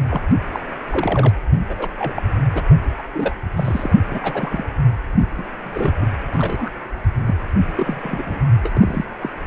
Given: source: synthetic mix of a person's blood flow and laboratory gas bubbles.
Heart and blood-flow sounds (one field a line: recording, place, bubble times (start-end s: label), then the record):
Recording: Doppler ultrasound of blood flow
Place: precordium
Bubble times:
0.00-0.21 s: bubbles
0.52-0.60 s: bubbles
0.82-1.30 s: bubbles
1.52-1.58 s: bubbles
1.69-1.74 s: bubbles
1.77-1.89 s: bubbles
1.98-2.23 s: bubbles
2.54-2.62 s: bubbles
2.69-2.75 s: bubbles
2.98-3.02 s: bubbles
3.14-3.35 s: bubbles
3.56-3.94 s: bubbles
4.10-4.19 s: bubbles
4.23-4.64 s: bubbles
5.38-5.44 s: bubbles
5.59-6.07 s: bubbles
6.32-6.70 s: bubbles
7.26-7.35 s: bubbles
7.75-8.24 s: bubbles
8.26-8.40 s: bubbles
8.63-8.71 s: bubbles
8.74-9.04 s: bubbles
9.21-9.29 s: bubbles
From the record:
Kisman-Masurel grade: 242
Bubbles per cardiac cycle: several, 3 to 8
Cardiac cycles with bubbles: 100%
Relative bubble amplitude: moderate (0.250 to 0.450)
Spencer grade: 3 (all of the cardiac periods contain showers or single bubble signals, but not dominating or overriding the cardiac motion signals)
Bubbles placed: anywhere in the cardiac cycle